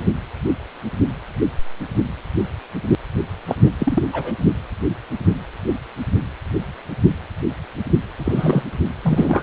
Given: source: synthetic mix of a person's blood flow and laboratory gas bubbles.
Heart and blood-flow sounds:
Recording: Doppler ultrasound of blood flow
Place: precordium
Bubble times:
3.47-3.55 s: bubbles
3.65-3.71 s: bubbles
3.79-4.03 s: bubbles
4.12-4.34 s: bubbles
8.19-8.63 s: bubbles
9.03-9.43 s: bubbles
From the record:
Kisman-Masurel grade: 223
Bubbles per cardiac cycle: several, 3 to 8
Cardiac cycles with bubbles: 10 to 50%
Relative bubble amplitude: loud (0.450 to 0.775)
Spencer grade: 2 (many but less than half of the cardiac periods contain bubble signals, singularly or in groups)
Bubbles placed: anywhere in the cardiac cycle

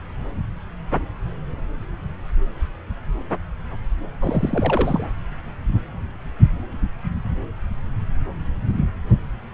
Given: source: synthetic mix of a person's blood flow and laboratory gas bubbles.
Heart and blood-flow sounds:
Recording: Doppler ultrasound of blood flow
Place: subclavian vein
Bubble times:
4.21-5.08 s: bubbles
From the record:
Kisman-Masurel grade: 212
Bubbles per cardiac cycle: several, 3 to 8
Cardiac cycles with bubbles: 1 to 10%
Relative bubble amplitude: moderate (0.250 to 0.450)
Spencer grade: 1 (occasional bubble signal discernible with the cardiac motion signal, with majority of cardiac periods free of bubbles)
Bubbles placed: anywhere in the cardiac cycle

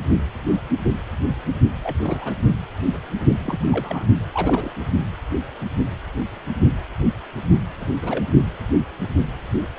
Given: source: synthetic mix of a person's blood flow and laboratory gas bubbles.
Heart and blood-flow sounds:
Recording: Doppler ultrasound of blood flow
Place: precordium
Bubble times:
1.83-2.33 s: bubbles
3.39-4.05 s: bubbles
4.33-4.74 s: bubbles
7.80-7.86 s: bubbles
8.02-8.25 s: bubbles
From the record:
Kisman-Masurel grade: 221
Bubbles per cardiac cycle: several, 3 to 8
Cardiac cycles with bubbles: 10 to 50%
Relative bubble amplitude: barely perceptible (0.100 to 0.250)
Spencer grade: 2 (many but less than half of the cardiac periods contain bubble signals, singularly or in groups)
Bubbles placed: only in the low amplitude regions of the cardiac cycle

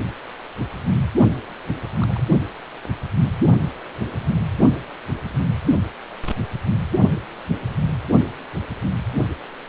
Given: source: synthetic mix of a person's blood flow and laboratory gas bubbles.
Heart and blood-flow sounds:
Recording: Doppler ultrasound of blood flow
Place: precordium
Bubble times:
2.00-2.22 s: bubbles
From the record:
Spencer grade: 2 (many but less than half of the cardiac periods contain bubble signals, singularly or in groups)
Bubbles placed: only in the low amplitude regions of the cardiac cycle

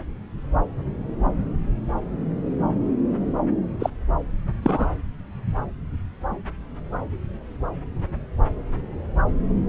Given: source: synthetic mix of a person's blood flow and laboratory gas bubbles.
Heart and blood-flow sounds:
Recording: Doppler ultrasound of blood flow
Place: subclavian vein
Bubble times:
3.79-3.90 s: bubbles
4.62-4.88 s: bubbles
From the record:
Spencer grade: 2 (many but less than half of the cardiac periods contain bubble signals, singularly or in groups)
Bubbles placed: anywhere in the cardiac cycle

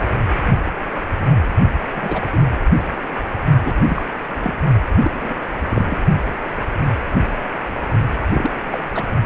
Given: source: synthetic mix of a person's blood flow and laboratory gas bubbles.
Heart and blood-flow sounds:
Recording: Doppler ultrasound of blood flow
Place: precordium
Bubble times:
1.95-2.22 s: bubbles
2.33-2.43 s: bubbles
3.63-3.75 s: bubbles
3.87-4.04 s: bubbles
4.43-4.54 s: bubbles
5.03-5.11 s: bubbles
5.14-5.34 s: bubbles
5.69-5.98 s: bubbles
8.34-8.51 s: bubbles
8.70-8.79 s: bubbles
8.95-9.04 s: bubbles
From the record:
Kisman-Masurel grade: 232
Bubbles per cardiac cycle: several, 3 to 8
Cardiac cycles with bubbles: 50 to 99%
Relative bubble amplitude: moderate (0.250 to 0.450)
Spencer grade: 3 (all of the cardiac periods contain showers or single bubble signals, but not dominating or overriding the cardiac motion signals)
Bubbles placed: anywhere in the cardiac cycle

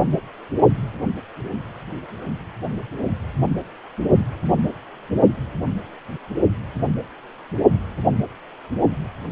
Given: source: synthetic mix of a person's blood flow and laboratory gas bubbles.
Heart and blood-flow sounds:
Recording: Doppler ultrasound of blood flow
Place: precordium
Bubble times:
no bubbles
From the record:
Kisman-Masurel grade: 000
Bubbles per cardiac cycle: 0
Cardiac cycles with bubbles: 0%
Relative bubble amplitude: no bubbles discernible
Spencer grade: 0 (complete lack of bubble signals)

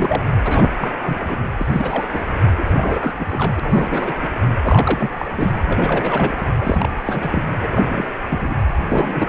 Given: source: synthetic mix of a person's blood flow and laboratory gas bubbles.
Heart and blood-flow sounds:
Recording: Doppler ultrasound of blood flow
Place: precordium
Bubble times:
0.00-0.25 s: bubbles
0.44-0.70 s: bubbles
0.77-0.91 s: bubbles
1.00-1.18 s: bubbles
1.21-1.35 s: bubbles
1.57-2.08 s: bubbles
2.12-2.29 s: bubbles
2.57-3.60 s: bubbles
3.62-4.14 s: bubbles
4.21-4.29 s: bubbles
4.63-5.11 s: bubbles
5.19-5.25 s: bubbles
5.31-5.52 s: bubbles
5.67-6.46 s: bubbles
6.61-7.43 s: bubbles
7.61-8.05 s: bubbles
8.29-8.54 s: bubbles
8.89-9.28 s: bubbles
From the record:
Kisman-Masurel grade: 332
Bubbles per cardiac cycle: rolling drumbeat, 9 or more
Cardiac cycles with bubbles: 50 to 99%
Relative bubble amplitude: moderate (0.250 to 0.450)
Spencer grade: 3 (all of the cardiac periods contain showers or single bubble signals, but not dominating or overriding the cardiac motion signals)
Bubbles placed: anywhere in the cardiac cycle

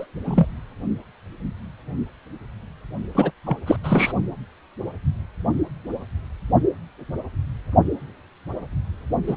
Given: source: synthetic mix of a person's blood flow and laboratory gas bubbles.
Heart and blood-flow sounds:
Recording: Doppler ultrasound of blood flow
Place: precordium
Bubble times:
0.00-0.05 s: bubbles
0.24-0.47 s: bubbles
3.15-3.31 s: bubbles
3.46-3.57 s: bubbles
3.66-3.76 s: bubbles
3.83-4.12 s: bubbles
9.27-9.37 s: bubbles
From the record:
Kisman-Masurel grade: 223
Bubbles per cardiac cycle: several, 3 to 8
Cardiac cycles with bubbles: 10 to 50%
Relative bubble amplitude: loud (0.450 to 0.775)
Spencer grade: 2 (many but less than half of the cardiac periods contain bubble signals, singularly or in groups)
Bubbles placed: only in the low amplitude regions of the cardiac cycle

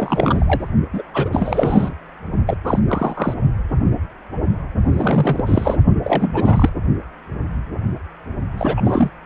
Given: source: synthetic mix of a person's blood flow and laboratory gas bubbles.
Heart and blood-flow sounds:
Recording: Doppler ultrasound of blood flow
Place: precordium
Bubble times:
0.00-0.69 s: bubbles
0.93-1.02 s: bubbles
1.14-1.94 s: bubbles
2.46-2.57 s: bubbles
2.63-2.79 s: bubbles
2.88-3.34 s: bubbles
4.92-5.77 s: bubbles
6.04-6.69 s: bubbles
8.57-9.11 s: bubbles
From the record:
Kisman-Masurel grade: 333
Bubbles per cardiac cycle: rolling drumbeat, 9 or more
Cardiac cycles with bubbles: 50 to 99%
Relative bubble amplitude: loud (0.450 to 0.775)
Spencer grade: 3 (all of the cardiac periods contain showers or single bubble signals, but not dominating or overriding the cardiac motion signals)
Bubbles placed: only in the low amplitude regions of the cardiac cycle

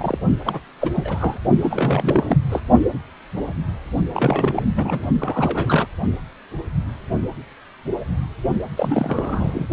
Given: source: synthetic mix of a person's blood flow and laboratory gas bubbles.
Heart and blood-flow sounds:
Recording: Doppler ultrasound of blood flow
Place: precordium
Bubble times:
0.00-0.18 s: bubbles
0.45-0.60 s: bubbles
0.80-1.40 s: bubbles
1.60-2.37 s: bubbles
2.49-2.61 s: bubbles
4.13-4.62 s: bubbles
4.75-5.07 s: bubbles
5.18-5.87 s: bubbles
8.77-9.66 s: bubbles
From the record:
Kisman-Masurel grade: 332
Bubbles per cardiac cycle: rolling drumbeat, 9 or more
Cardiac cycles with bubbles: 50 to 99%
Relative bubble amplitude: moderate (0.250 to 0.450)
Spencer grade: 3 (all of the cardiac periods contain showers or single bubble signals, but not dominating or overriding the cardiac motion signals)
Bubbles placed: only in the low amplitude regions of the cardiac cycle

